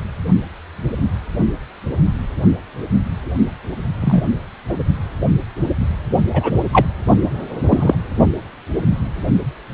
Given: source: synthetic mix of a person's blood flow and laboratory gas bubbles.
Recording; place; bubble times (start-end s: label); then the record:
Doppler ultrasound of blood flow; precordium
4.01-4.22 s: bubbles
4.69-4.75 s: bubbles
6.33-6.52 s: bubbles
6.72-6.85 s: bubbles
7.69-7.95 s: bubbles
From the record:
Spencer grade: 2 (many but less than half of the cardiac periods contain bubble signals, singularly or in groups); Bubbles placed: only in the low amplitude regions of the cardiac cycle